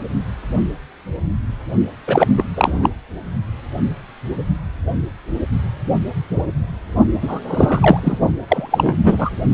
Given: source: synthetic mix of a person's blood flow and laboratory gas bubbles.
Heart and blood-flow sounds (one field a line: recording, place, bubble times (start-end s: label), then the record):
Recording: Doppler ultrasound of blood flow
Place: precordium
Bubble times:
2.07-2.27 s: bubbles
2.37-2.44 s: bubbles
2.56-2.90 s: bubbles
7.21-7.39 s: bubbles
7.47-8.18 s: bubbles
8.48-8.95 s: bubbles
9.04-9.30 s: bubbles
From the record:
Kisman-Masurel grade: 223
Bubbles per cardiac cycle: several, 3 to 8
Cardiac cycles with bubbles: 10 to 50%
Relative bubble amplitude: loud (0.450 to 0.775)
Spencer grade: 2 (many but less than half of the cardiac periods contain bubble signals, singularly or in groups)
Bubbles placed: only in the low amplitude regions of the cardiac cycle